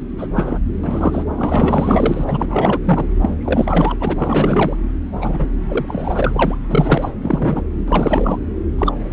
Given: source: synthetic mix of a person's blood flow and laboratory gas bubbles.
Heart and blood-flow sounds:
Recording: Doppler ultrasound of blood flow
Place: subclavian vein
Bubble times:
0.17-0.28 s: bubbles
0.34-0.59 s: bubbles
0.83-1.25 s: bubbles
1.37-2.80 s: bubbles
2.84-3.05 s: bubbles
3.21-3.35 s: bubbles
3.40-3.95 s: bubbles
4.00-4.78 s: bubbles
5.21-5.48 s: bubbles
5.68-6.58 s: bubbles
6.70-7.12 s: bubbles
7.21-7.64 s: bubbles
7.88-8.39 s: bubbles
8.78-8.93 s: bubbles
9.01-9.13 s: bubbles
From the record:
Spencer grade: 4 (maximum detectable bubble signal sounding continuously throughout systole and diastole of every cardiac period, and overriding the amplitude of the normal cardiac signals)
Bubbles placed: anywhere in the cardiac cycle

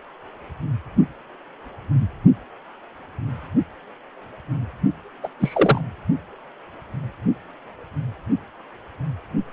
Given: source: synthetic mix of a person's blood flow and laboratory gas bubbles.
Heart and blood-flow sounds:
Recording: Doppler ultrasound of blood flow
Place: precordium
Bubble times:
5.23-5.28 s: bubbles
5.39-5.82 s: bubbles
From the record:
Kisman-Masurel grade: 223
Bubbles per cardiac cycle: several, 3 to 8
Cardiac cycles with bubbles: 10 to 50%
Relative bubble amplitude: loud (0.450 to 0.775)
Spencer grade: 2 (many but less than half of the cardiac periods contain bubble signals, singularly or in groups)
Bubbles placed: only in the low amplitude regions of the cardiac cycle

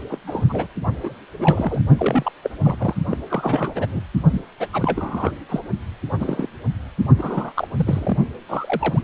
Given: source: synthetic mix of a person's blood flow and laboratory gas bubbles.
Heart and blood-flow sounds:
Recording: Doppler ultrasound of blood flow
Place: precordium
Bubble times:
0.09-0.17 s: bubbles
0.27-0.46 s: bubbles
0.48-0.68 s: bubbles
1.03-1.15 s: bubbles
1.39-1.82 s: bubbles
1.98-2.32 s: bubbles
2.42-2.50 s: bubbles
2.64-2.94 s: bubbles
3.10-3.17 s: bubbles
3.30-3.86 s: bubbles
3.89-4.01 s: bubbles
4.31-4.44 s: bubbles
4.60-4.67 s: bubbles
4.72-5.31 s: bubbles
5.49-5.60 s: bubbles
6.19-6.47 s: bubbles
7.18-7.67 s: bubbles
7.76-8.17 s: bubbles
8.48-9.04 s: bubbles
From the record:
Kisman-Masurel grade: 242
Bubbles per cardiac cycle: several, 3 to 8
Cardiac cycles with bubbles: 100%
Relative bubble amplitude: moderate (0.250 to 0.450)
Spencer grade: 3 (all of the cardiac periods contain showers or single bubble signals, but not dominating or overriding the cardiac motion signals)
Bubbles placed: only in the low amplitude regions of the cardiac cycle

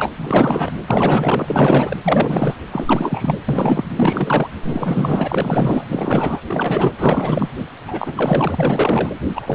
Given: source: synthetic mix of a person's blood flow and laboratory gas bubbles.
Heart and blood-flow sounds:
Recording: Doppler ultrasound of blood flow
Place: precordium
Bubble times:
0.00-0.10 s: bubbles
0.16-0.71 s: bubbles
0.87-1.96 s: bubbles
2.03-2.55 s: bubbles
2.71-3.38 s: bubbles
3.48-3.84 s: bubbles
3.96-4.47 s: bubbles
4.62-5.86 s: bubbles
5.88-6.41 s: bubbles
6.46-6.92 s: bubbles
6.98-7.49 s: bubbles
7.87-9.10 s: bubbles
9.34-9.55 s: bubbles
From the record:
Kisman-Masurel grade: 444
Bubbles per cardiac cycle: continuous sound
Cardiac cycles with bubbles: 100%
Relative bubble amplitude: maximal (0.775 to 0.999)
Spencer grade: 4 (maximum detectable bubble signal sounding continuously throughout systole and diastole of every cardiac period, and overriding the amplitude of the normal cardiac signals)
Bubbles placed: anywhere in the cardiac cycle

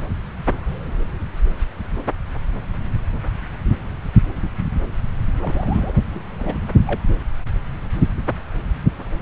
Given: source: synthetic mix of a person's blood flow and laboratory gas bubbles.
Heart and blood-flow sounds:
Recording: Doppler ultrasound of blood flow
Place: subclavian vein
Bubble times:
5.42-5.92 s: bubbles
6.10-6.21 s: bubbles
6.39-6.58 s: bubbles
6.87-7.00 s: bubbles
From the record:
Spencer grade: 1 (occasional bubble signal discernible with the cardiac motion signal, with majority of cardiac periods free of bubbles)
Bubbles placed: anywhere in the cardiac cycle

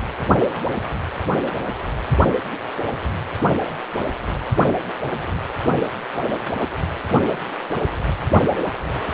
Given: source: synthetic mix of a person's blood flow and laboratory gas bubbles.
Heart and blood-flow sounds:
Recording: Doppler ultrasound of blood flow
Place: precordium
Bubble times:
no bubbles
From the record:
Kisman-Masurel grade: 000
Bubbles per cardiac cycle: 0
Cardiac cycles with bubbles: 0%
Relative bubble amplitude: no bubbles discernible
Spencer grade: 0 (complete lack of bubble signals)

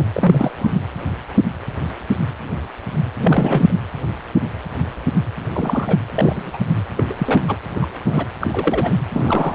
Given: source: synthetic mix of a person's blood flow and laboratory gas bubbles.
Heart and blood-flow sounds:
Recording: Doppler ultrasound of blood flow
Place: precordium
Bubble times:
0.00-0.05 s: bubbles
0.13-0.50 s: bubbles
0.58-0.76 s: bubbles
3.19-3.74 s: bubbles
5.52-5.98 s: bubbles
6.14-6.58 s: bubbles
6.75-6.83 s: bubbles
6.97-7.04 s: bubbles
7.09-7.14 s: bubbles
7.18-7.44 s: bubbles
7.47-7.57 s: bubbles
7.75-7.87 s: bubbles
8.07-8.27 s: bubbles
8.41-8.93 s: bubbles
9.13-9.55 s: bubbles
From the record:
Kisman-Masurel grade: 232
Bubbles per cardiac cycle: several, 3 to 8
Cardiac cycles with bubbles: 50 to 99%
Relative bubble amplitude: moderate (0.250 to 0.450)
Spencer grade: 3 (all of the cardiac periods contain showers or single bubble signals, but not dominating or overriding the cardiac motion signals)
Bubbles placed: anywhere in the cardiac cycle

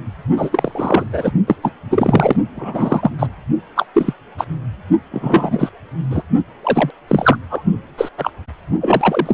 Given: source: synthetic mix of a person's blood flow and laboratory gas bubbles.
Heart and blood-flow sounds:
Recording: Doppler ultrasound of blood flow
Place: precordium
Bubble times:
0.36-1.32 s: bubbles
1.47-1.56 s: bubbles
1.62-1.71 s: bubbles
1.90-2.36 s: bubbles
2.56-3.12 s: bubbles
3.19-3.27 s: bubbles
3.75-3.85 s: bubbles
3.94-4.13 s: bubbles
4.38-4.46 s: bubbles
5.11-5.69 s: bubbles
6.10-6.22 s: bubbles
6.63-6.90 s: bubbles
7.07-7.37 s: bubbles
7.50-7.62 s: bubbles
7.97-8.09 s: bubbles
8.17-8.30 s: bubbles
8.80-9.34 s: bubbles
From the record:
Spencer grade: 3 (all of the cardiac periods contain showers or single bubble signals, but not dominating or overriding the cardiac motion signals)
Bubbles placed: only in the low amplitude regions of the cardiac cycle

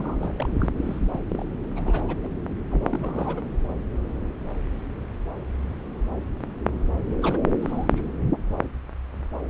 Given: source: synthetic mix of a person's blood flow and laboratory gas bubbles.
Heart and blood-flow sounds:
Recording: Doppler ultrasound of blood flow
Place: subclavian vein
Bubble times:
0.00-0.17 s: bubbles
0.20-0.33 s: bubbles
0.35-0.49 s: bubbles
0.55-0.70 s: bubbles
0.75-1.20 s: bubbles
1.29-1.44 s: bubbles
1.75-2.31 s: bubbles
2.71-2.83 s: bubbles
2.90-3.42 s: bubbles
7.15-7.42 s: bubbles
7.61-8.05 s: bubbles
From the record:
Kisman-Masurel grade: 232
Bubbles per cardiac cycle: several, 3 to 8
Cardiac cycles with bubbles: 50 to 99%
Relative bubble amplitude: moderate (0.250 to 0.450)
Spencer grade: 3 (all of the cardiac periods contain showers or single bubble signals, but not dominating or overriding the cardiac motion signals)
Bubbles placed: anywhere in the cardiac cycle

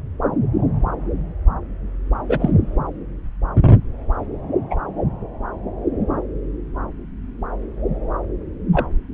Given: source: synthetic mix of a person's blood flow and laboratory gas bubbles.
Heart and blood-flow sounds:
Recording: Doppler ultrasound of blood flow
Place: subclavian vein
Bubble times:
2.29-2.51 s: bubbles
4.70-4.77 s: bubbles
8.73-8.87 s: bubbles
From the record:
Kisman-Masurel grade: 123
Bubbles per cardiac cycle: 1 to 2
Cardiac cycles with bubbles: 10 to 50%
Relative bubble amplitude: loud (0.450 to 0.775)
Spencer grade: 2 (many but less than half of the cardiac periods contain bubble signals, singularly or in groups)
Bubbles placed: anywhere in the cardiac cycle

